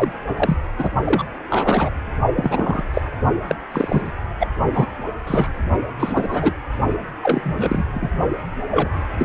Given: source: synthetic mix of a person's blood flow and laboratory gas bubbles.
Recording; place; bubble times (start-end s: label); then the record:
Doppler ultrasound of blood flow; precordium
0.00-0.13 s: bubbles
0.36-0.59 s: bubbles
0.78-0.91 s: bubbles
1.04-1.25 s: bubbles
1.50-1.91 s: bubbles
2.35-2.82 s: bubbles
2.94-3.01 s: bubbles
3.47-3.55 s: bubbles
3.72-4.11 s: bubbles
4.40-4.48 s: bubbles
4.74-4.87 s: bubbles
5.27-5.50 s: bubbles
5.99-6.53 s: bubbles
7.23-7.85 s: bubbles
7.93-8.09 s: bubbles
8.71-8.90 s: bubbles
9.19-9.25 s: bubbles
From the record:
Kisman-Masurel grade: 243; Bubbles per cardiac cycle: several, 3 to 8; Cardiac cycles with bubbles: 100%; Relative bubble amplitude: loud (0.450 to 0.775); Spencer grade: 3 (all of the cardiac periods contain showers or single bubble signals, but not dominating or overriding the cardiac motion signals); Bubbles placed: only in the low amplitude regions of the cardiac cycle